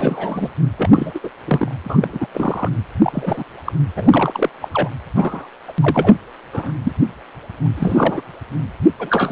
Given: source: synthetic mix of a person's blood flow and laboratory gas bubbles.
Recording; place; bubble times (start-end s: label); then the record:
Doppler ultrasound of blood flow; precordium
0.00-0.49 s: bubbles
0.77-0.90 s: bubbles
0.93-1.11 s: bubbles
1.14-1.19 s: bubbles
1.23-1.30 s: bubbles
1.46-1.74 s: bubbles
1.83-2.27 s: bubbles
2.33-2.69 s: bubbles
3.02-3.44 s: bubbles
3.65-3.72 s: bubbles
3.96-4.50 s: bubbles
4.61-4.68 s: bubbles
4.72-4.89 s: bubbles
5.16-5.47 s: bubbles
5.68-5.72 s: bubbles
5.80-6.13 s: bubbles
6.53-6.72 s: bubbles
6.83-6.92 s: bubbles
7.64-7.67 s: bubbles
7.76-8.22 s: bubbles
8.99-9.31 s: bubbles
From the record:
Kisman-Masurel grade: 243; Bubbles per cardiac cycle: several, 3 to 8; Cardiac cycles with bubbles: 100%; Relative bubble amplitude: loud (0.450 to 0.775); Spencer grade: 3 (all of the cardiac periods contain showers or single bubble signals, but not dominating or overriding the cardiac motion signals); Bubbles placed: anywhere in the cardiac cycle